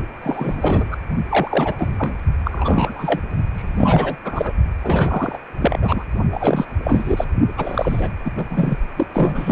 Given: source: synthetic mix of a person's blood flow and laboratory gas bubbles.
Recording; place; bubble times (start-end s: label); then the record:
Doppler ultrasound of blood flow; precordium
0.22-0.98 s: bubbles
1.28-2.17 s: bubbles
2.44-3.21 s: bubbles
3.54-4.17 s: bubbles
4.25-4.53 s: bubbles
4.83-5.38 s: bubbles
5.60-5.78 s: bubbles
5.81-6.04 s: bubbles
6.32-6.65 s: bubbles
6.83-7.25 s: bubbles
7.57-8.10 s: bubbles
8.25-8.31 s: bubbles
8.37-8.44 s: bubbles
8.50-8.78 s: bubbles
8.96-9.07 s: bubbles
9.13-9.52 s: bubbles
From the record:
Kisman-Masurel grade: 333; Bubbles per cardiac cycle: rolling drumbeat, 9 or more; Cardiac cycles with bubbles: 50 to 99%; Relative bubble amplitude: loud (0.450 to 0.775); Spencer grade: 3 (all of the cardiac periods contain showers or single bubble signals, but not dominating or overriding the cardiac motion signals); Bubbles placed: only in the low amplitude regions of the cardiac cycle